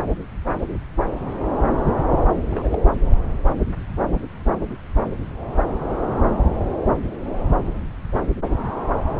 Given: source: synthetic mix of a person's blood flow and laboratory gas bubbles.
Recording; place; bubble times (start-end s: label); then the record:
Doppler ultrasound of blood flow; subclavian vein
2.50-2.69 s: bubbles
2.71-2.79 s: bubbles
From the record:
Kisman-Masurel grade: 121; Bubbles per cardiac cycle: 1 to 2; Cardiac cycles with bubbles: 10 to 50%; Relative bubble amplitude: barely perceptible (0.100 to 0.250); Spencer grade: 2 (many but less than half of the cardiac periods contain bubble signals, singularly or in groups); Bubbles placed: anywhere in the cardiac cycle